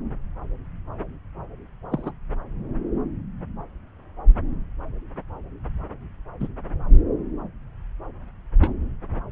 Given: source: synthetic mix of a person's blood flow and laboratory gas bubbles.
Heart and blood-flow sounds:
Doppler ultrasound of blood flow; subclavian vein
1.91-2.12 s: bubbles
6.39-6.47 s: bubbles
8.61-8.71 s: bubbles
From the record:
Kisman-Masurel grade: 121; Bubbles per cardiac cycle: 1 to 2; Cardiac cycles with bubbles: 10 to 50%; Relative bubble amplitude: barely perceptible (0.100 to 0.250); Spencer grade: 2 (many but less than half of the cardiac periods contain bubble signals, singularly or in groups); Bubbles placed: anywhere in the cardiac cycle

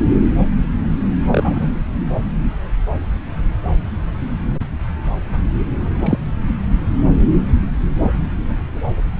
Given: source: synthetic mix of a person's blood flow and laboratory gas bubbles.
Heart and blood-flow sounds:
Doppler ultrasound of blood flow; subclavian vein
1.31-1.68 s: bubbles
6.00-6.17 s: bubbles
From the record:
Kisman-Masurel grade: 123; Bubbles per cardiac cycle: 1 to 2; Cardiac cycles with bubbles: 10 to 50%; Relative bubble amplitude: loud (0.450 to 0.775); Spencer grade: 2 (many but less than half of the cardiac periods contain bubble signals, singularly or in groups); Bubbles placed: anywhere in the cardiac cycle

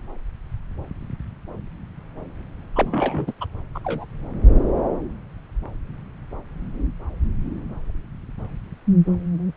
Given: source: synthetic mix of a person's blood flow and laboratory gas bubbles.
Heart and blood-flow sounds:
Doppler ultrasound of blood flow; subclavian vein
2.75-3.33 s: bubbles
3.41-3.46 s: bubbles
3.75-3.79 s: bubbles
3.84-4.06 s: bubbles
From the record:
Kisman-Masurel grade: 212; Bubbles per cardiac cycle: several, 3 to 8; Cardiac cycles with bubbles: 1 to 10%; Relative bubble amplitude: moderate (0.250 to 0.450); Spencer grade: 1 (occasional bubble signal discernible with the cardiac motion signal, with majority of cardiac periods free of bubbles); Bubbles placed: anywhere in the cardiac cycle

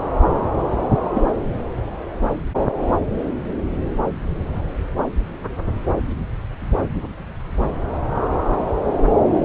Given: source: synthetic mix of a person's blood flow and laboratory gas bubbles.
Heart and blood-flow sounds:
Doppler ultrasound of blood flow; subclavian vein
1.13-1.22 s: bubbles
From the record:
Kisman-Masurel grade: 112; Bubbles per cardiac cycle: 1 to 2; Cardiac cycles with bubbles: 1 to 10%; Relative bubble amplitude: moderate (0.250 to 0.450); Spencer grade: 1 (occasional bubble signal discernible with the cardiac motion signal, with majority of cardiac periods free of bubbles); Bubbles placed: anywhere in the cardiac cycle

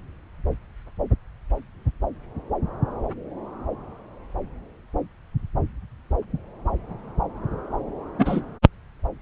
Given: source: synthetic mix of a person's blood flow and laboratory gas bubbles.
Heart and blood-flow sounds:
Doppler ultrasound of blood flow; subclavian vein
8.19-8.41 s: bubbles
From the record:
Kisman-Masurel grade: 113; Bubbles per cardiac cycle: 1 to 2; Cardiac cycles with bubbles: 1 to 10%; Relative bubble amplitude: loud (0.450 to 0.775); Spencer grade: 1 (occasional bubble signal discernible with the cardiac motion signal, with majority of cardiac periods free of bubbles); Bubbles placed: anywhere in the cardiac cycle

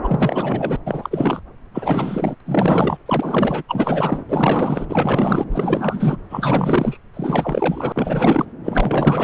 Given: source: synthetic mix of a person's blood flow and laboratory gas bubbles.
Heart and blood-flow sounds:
Doppler ultrasound of blood flow; subclavian vein
0.03-0.77 s: bubbles
0.85-1.40 s: bubbles
1.73-2.35 s: bubbles
2.46-2.98 s: bubbles
3.06-3.63 s: bubbles
3.69-4.24 s: bubbles
4.29-4.86 s: bubbles
4.89-5.44 s: bubbles
5.52-6.17 s: bubbles
6.29-6.98 s: bubbles
7.13-8.45 s: bubbles
8.63-9.24 s: bubbles
From the record:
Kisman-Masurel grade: 444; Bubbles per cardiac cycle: continuous sound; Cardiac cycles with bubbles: 100%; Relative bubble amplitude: maximal (0.775 to 0.999); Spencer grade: 4 (maximum detectable bubble signal sounding continuously throughout systole and diastole of every cardiac period, and overriding the amplitude of the normal cardiac signals); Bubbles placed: anywhere in the cardiac cycle

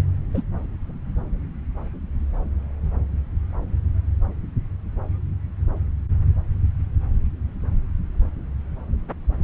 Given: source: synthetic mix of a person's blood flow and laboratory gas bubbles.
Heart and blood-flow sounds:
Doppler ultrasound of blood flow; subclavian vein
0.34-0.42 s: bubbles
From the record:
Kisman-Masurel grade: 112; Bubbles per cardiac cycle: 1 to 2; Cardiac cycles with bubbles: 1 to 10%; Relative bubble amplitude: moderate (0.250 to 0.450); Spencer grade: 1 (occasional bubble signal discernible with the cardiac motion signal, with majority of cardiac periods free of bubbles); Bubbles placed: anywhere in the cardiac cycle

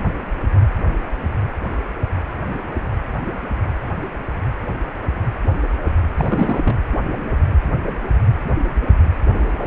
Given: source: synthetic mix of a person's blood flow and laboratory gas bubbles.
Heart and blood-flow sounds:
Doppler ultrasound of blood flow; precordium
6.18-6.80 s: bubbles
From the record:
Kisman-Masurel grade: 212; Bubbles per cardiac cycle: several, 3 to 8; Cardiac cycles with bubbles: 1 to 10%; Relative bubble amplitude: moderate (0.250 to 0.450); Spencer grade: 1 (occasional bubble signal discernible with the cardiac motion signal, with majority of cardiac periods free of bubbles); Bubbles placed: anywhere in the cardiac cycle

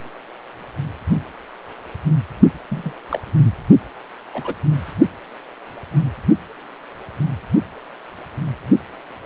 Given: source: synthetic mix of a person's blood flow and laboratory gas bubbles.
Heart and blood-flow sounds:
Doppler ultrasound of blood flow; precordium
2.69-2.99 s: bubbles
3.09-3.20 s: bubbles
4.33-4.55 s: bubbles
From the record:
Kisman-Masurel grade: 122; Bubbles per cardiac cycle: 1 to 2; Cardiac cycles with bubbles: 10 to 50%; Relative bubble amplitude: moderate (0.250 to 0.450); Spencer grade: 2 (many but less than half of the cardiac periods contain bubble signals, singularly or in groups); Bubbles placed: anywhere in the cardiac cycle

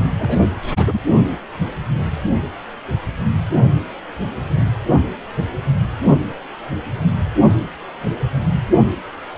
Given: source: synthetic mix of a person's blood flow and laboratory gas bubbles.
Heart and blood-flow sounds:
Doppler ultrasound of blood flow; precordium
0.19-0.40 s: bubbles
0.71-1.01 s: bubbles
From the record:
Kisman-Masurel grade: 212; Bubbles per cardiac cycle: several, 3 to 8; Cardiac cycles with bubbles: 1 to 10%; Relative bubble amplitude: moderate (0.250 to 0.450); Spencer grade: 1 (occasional bubble signal discernible with the cardiac motion signal, with majority of cardiac periods free of bubbles); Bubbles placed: anywhere in the cardiac cycle

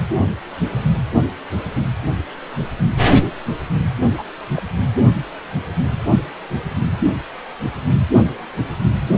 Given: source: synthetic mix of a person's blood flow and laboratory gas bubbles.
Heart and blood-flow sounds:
Doppler ultrasound of blood flow; precordium
4.17-4.24 s: bubbles
4.55-4.63 s: bubbles
From the record:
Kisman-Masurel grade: 111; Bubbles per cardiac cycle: 1 to 2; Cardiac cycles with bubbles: 1 to 10%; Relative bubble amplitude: barely perceptible (0.100 to 0.250); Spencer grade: 1 (occasional bubble signal discernible with the cardiac motion signal, with majority of cardiac periods free of bubbles); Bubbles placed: anywhere in the cardiac cycle

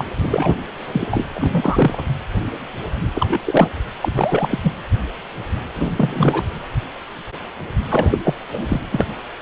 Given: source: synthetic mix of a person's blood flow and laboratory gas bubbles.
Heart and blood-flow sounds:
Doppler ultrasound of blood flow; precordium
0.00-0.07 s: bubbles
0.17-0.56 s: bubbles
0.92-1.08 s: bubbles
1.10-1.27 s: bubbles
1.35-2.08 s: bubbles
3.15-3.41 s: bubbles
3.46-3.69 s: bubbles
4.01-4.59 s: bubbles
4.62-4.72 s: bubbles
5.75-5.91 s: bubbles
5.96-6.43 s: bubbles
7.90-8.19 s: bubbles
8.24-8.33 s: bubbles
8.52-9.05 s: bubbles
From the record:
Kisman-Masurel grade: 333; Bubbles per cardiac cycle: rolling drumbeat, 9 or more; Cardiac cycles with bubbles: 50 to 99%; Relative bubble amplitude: loud (0.450 to 0.775); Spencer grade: 3 (all of the cardiac periods contain showers or single bubble signals, but not dominating or overriding the cardiac motion signals); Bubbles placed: anywhere in the cardiac cycle

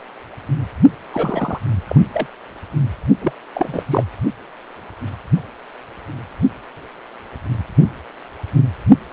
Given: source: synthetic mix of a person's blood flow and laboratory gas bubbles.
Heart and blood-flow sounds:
Doppler ultrasound of blood flow; precordium
1.12-1.60 s: bubbles
1.88-2.01 s: bubbles
2.13-2.26 s: bubbles
3.21-3.32 s: bubbles
3.54-3.83 s: bubbles
3.89-4.04 s: bubbles
From the record:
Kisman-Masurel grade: 222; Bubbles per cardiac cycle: several, 3 to 8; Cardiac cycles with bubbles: 10 to 50%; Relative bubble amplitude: moderate (0.250 to 0.450); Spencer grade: 2 (many but less than half of the cardiac periods contain bubble signals, singularly or in groups); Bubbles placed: only in the low amplitude regions of the cardiac cycle

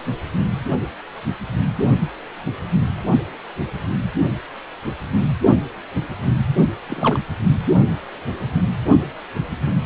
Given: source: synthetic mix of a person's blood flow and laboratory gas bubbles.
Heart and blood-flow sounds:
Doppler ultrasound of blood flow; precordium
6.89-7.19 s: bubbles
From the record:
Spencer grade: 2 (many but less than half of the cardiac periods contain bubble signals, singularly or in groups); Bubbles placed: anywhere in the cardiac cycle

